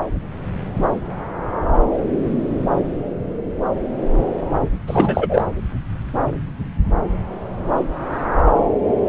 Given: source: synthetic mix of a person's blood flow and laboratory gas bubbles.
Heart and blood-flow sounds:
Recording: Doppler ultrasound of blood flow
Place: subclavian vein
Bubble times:
4.87-5.44 s: bubbles
From the record:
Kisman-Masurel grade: 213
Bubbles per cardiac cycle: several, 3 to 8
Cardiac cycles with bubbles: 1 to 10%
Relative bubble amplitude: loud (0.450 to 0.775)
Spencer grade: 1 (occasional bubble signal discernible with the cardiac motion signal, with majority of cardiac periods free of bubbles)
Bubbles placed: anywhere in the cardiac cycle

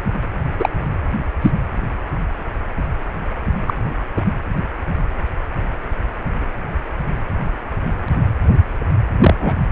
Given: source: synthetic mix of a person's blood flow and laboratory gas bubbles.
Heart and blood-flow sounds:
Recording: Doppler ultrasound of blood flow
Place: precordium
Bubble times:
0.59-0.69 s: bubbles
1.41-1.50 s: bubbles
3.67-3.74 s: bubbles
4.17-4.22 s: bubbles
9.20-9.35 s: bubbles
9.38-9.61 s: bubbles
From the record:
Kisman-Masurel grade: 123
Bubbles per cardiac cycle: 1 to 2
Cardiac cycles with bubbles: 10 to 50%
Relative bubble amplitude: loud (0.450 to 0.775)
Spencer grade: 2 (many but less than half of the cardiac periods contain bubble signals, singularly or in groups)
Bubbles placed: anywhere in the cardiac cycle

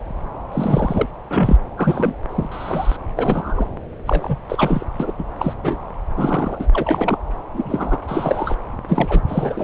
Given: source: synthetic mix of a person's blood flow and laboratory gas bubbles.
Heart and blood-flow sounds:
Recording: Doppler ultrasound of blood flow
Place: subclavian vein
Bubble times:
0.52-1.06 s: bubbles
1.29-1.57 s: bubbles
1.77-2.15 s: bubbles
2.29-2.96 s: bubbles
3.17-3.68 s: bubbles
4.05-4.39 s: bubbles
4.49-4.84 s: bubbles
5.00-5.12 s: bubbles
5.18-5.23 s: bubbles
5.39-5.54 s: bubbles
5.57-5.78 s: bubbles
6.17-6.67 s: bubbles
6.74-7.17 s: bubbles
7.54-7.98 s: bubbles
8.07-8.55 s: bubbles
8.88-9.21 s: bubbles
9.28-9.63 s: bubbles
From the record:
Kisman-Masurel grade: 232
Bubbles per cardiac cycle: several, 3 to 8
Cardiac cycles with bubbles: 50 to 99%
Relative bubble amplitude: moderate (0.250 to 0.450)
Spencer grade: 3 (all of the cardiac periods contain showers or single bubble signals, but not dominating or overriding the cardiac motion signals)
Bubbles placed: anywhere in the cardiac cycle

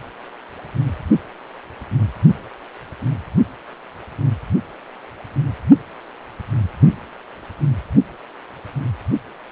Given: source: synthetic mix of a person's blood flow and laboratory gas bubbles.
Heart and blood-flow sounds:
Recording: Doppler ultrasound of blood flow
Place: precordium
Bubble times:
no bubbles
From the record:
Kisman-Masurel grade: 000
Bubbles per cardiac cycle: 0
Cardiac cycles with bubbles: 0%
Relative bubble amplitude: no bubbles discernible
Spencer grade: 0 (complete lack of bubble signals)

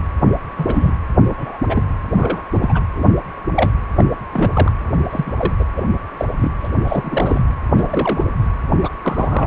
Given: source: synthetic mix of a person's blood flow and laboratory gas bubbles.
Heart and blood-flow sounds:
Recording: Doppler ultrasound of blood flow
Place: precordium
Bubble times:
0.58-0.92 s: bubbles
1.30-1.59 s: bubbles
1.69-1.84 s: bubbles
2.16-2.42 s: bubbles
2.52-2.81 s: bubbles
2.95-3.04 s: bubbles
3.56-3.71 s: bubbles
3.98-4.04 s: bubbles
4.33-4.50 s: bubbles
4.53-4.72 s: bubbles
4.96-5.33 s: bubbles
5.38-5.52 s: bubbles
5.59-5.64 s: bubbles
5.76-5.88 s: bubbles
6.17-6.25 s: bubbles
6.37-6.52 s: bubbles
6.63-6.69 s: bubbles
6.88-7.42 s: bubbles
7.74-8.24 s: bubbles
8.82-8.88 s: bubbles
9.02-9.46 s: bubbles
From the record:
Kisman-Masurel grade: 242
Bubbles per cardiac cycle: several, 3 to 8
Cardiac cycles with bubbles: 100%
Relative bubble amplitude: moderate (0.250 to 0.450)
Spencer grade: 3 (all of the cardiac periods contain showers or single bubble signals, but not dominating or overriding the cardiac motion signals)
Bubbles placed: anywhere in the cardiac cycle

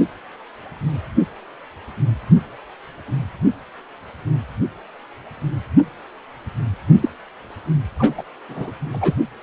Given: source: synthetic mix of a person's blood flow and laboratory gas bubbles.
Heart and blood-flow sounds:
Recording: Doppler ultrasound of blood flow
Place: precordium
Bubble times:
7.02-7.09 s: bubbles
7.98-8.23 s: bubbles
8.49-8.71 s: bubbles
8.91-9.16 s: bubbles
From the record:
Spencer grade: 1 (occasional bubble signal discernible with the cardiac motion signal, with majority of cardiac periods free of bubbles)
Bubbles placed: only in the low amplitude regions of the cardiac cycle

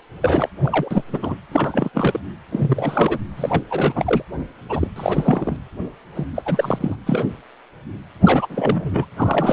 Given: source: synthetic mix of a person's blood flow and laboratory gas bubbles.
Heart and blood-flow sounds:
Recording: Doppler ultrasound of blood flow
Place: precordium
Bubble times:
0.22-0.49 s: bubbles
0.63-1.04 s: bubbles
1.11-1.35 s: bubbles
1.52-1.89 s: bubbles
1.94-2.19 s: bubbles
2.52-3.19 s: bubbles
3.36-3.64 s: bubbles
3.70-4.23 s: bubbles
4.70-4.88 s: bubbles
4.96-5.57 s: bubbles
6.15-6.26 s: bubbles
6.35-6.43 s: bubbles
6.45-6.96 s: bubbles
7.06-7.28 s: bubbles
8.22-8.46 s: bubbles
8.49-9.05 s: bubbles
9.16-9.52 s: bubbles
From the record:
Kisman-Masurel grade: 332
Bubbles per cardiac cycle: rolling drumbeat, 9 or more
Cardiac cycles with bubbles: 50 to 99%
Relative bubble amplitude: moderate (0.250 to 0.450)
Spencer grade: 3 (all of the cardiac periods contain showers or single bubble signals, but not dominating or overriding the cardiac motion signals)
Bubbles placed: anywhere in the cardiac cycle

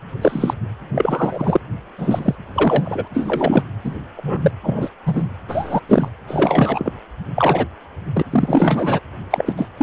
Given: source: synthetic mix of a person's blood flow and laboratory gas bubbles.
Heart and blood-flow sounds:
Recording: Doppler ultrasound of blood flow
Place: precordium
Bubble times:
0.21-0.54 s: bubbles
0.94-1.59 s: bubbles
1.98-2.35 s: bubbles
2.54-3.08 s: bubbles
3.14-3.63 s: bubbles
3.83-4.00 s: bubbles
4.16-4.51 s: bubbles
4.63-4.89 s: bubbles
5.05-5.26 s: bubbles
5.48-5.80 s: bubbles
5.88-6.08 s: bubbles
6.28-6.92 s: bubbles
7.35-7.66 s: bubbles
8.14-8.23 s: bubbles
8.30-9.00 s: bubbles
9.30-9.54 s: bubbles
9.57-9.69 s: bubbles
9.77-9.83 s: bubbles
From the record:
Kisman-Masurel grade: 243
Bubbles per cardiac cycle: several, 3 to 8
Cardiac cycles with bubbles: 100%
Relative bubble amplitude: loud (0.450 to 0.775)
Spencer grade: 3 (all of the cardiac periods contain showers or single bubble signals, but not dominating or overriding the cardiac motion signals)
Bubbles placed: anywhere in the cardiac cycle

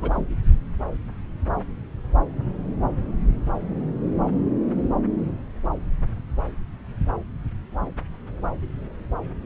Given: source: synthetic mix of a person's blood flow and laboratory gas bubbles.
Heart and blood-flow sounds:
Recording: Doppler ultrasound of blood flow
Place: subclavian vein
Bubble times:
0.00-0.25 s: bubbles
From the record:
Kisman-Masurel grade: 211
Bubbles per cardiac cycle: several, 3 to 8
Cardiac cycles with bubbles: 1 to 10%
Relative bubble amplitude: barely perceptible (0.100 to 0.250)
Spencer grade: 1 (occasional bubble signal discernible with the cardiac motion signal, with majority of cardiac periods free of bubbles)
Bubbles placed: anywhere in the cardiac cycle

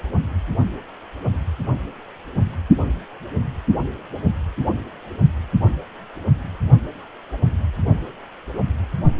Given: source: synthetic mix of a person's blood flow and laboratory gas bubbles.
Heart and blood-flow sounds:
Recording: Doppler ultrasound of blood flow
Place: precordium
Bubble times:
no bubbles
From the record:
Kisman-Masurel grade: 000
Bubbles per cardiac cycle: 0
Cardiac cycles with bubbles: 0%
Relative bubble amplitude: no bubbles discernible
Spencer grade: 0 (complete lack of bubble signals)

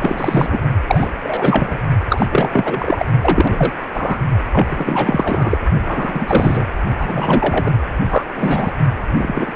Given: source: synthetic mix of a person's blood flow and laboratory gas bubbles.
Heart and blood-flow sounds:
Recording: Doppler ultrasound of blood flow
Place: precordium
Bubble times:
0.00-0.59 s: bubbles
0.86-1.11 s: bubbles
1.22-1.78 s: bubbles
2.09-2.26 s: bubbles
2.31-3.06 s: bubbles
3.21-3.73 s: bubbles
3.94-4.19 s: bubbles
4.52-5.58 s: bubbles
5.83-6.65 s: bubbles
6.98-7.70 s: bubbles
8.09-8.23 s: bubbles
8.35-8.72 s: bubbles
9.18-9.56 s: bubbles
From the record:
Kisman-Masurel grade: 343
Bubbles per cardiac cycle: rolling drumbeat, 9 or more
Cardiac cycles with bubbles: 100%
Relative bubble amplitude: loud (0.450 to 0.775)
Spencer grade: 3 (all of the cardiac periods contain showers or single bubble signals, but not dominating or overriding the cardiac motion signals)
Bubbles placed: only in the low amplitude regions of the cardiac cycle

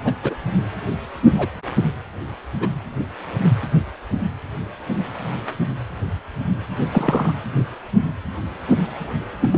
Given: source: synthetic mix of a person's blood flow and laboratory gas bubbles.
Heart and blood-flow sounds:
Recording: Doppler ultrasound of blood flow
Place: precordium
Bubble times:
0.04-0.13 s: bubbles
0.23-0.35 s: bubbles
1.35-1.46 s: bubbles
2.52-2.69 s: bubbles
6.92-7.33 s: bubbles
9.41-9.58 s: bubbles
From the record:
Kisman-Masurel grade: 122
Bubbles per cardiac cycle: 1 to 2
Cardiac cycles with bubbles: 10 to 50%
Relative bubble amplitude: moderate (0.250 to 0.450)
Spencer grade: 2 (many but less than half of the cardiac periods contain bubble signals, singularly or in groups)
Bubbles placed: anywhere in the cardiac cycle

